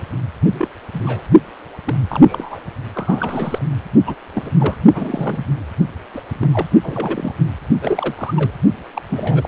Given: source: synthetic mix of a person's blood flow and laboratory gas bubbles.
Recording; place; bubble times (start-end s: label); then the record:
Doppler ultrasound of blood flow; precordium
0.51-0.68 s: bubbles
0.93-1.22 s: bubbles
1.84-1.95 s: bubbles
2.08-2.60 s: bubbles
2.94-3.62 s: bubbles
4.06-4.14 s: bubbles
4.34-4.50 s: bubbles
4.58-4.76 s: bubbles
4.94-5.46 s: bubbles
6.13-6.21 s: bubbles
6.39-6.49 s: bubbles
6.51-6.67 s: bubbles
6.83-7.33 s: bubbles
7.81-8.33 s: bubbles
8.36-8.52 s: bubbles
8.94-9.02 s: bubbles
9.09-9.48 s: bubbles
From the record:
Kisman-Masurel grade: 242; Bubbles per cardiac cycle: several, 3 to 8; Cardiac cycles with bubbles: 100%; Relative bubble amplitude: moderate (0.250 to 0.450); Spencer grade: 3 (all of the cardiac periods contain showers or single bubble signals, but not dominating or overriding the cardiac motion signals); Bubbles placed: only in the low amplitude regions of the cardiac cycle